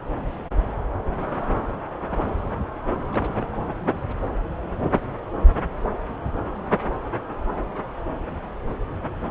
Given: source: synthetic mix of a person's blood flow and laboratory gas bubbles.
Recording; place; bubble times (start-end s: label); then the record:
Doppler ultrasound of blood flow; subclavian vein
3.11-3.51 s: bubbles
From the record:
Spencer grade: 1 (occasional bubble signal discernible with the cardiac motion signal, with majority of cardiac periods free of bubbles); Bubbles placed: anywhere in the cardiac cycle